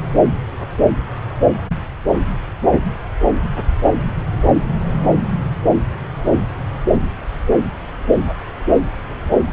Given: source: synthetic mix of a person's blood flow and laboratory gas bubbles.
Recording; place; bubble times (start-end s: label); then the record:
Doppler ultrasound of blood flow; subclavian vein
no bubbles
From the record:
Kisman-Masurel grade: 000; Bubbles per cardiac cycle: 0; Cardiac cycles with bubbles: 0%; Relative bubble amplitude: no bubbles discernible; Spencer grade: 0 (complete lack of bubble signals)